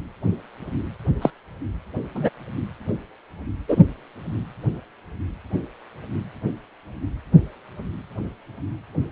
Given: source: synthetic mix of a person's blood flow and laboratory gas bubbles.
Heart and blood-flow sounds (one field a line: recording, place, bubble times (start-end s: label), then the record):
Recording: Doppler ultrasound of blood flow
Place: precordium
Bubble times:
1.22-1.30 s: bubbles
2.15-2.29 s: bubbles
3.68-3.84 s: bubbles
From the record:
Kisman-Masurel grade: 123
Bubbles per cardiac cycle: 1 to 2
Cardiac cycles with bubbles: 10 to 50%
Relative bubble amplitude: loud (0.450 to 0.775)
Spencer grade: 2 (many but less than half of the cardiac periods contain bubble signals, singularly or in groups)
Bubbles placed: anywhere in the cardiac cycle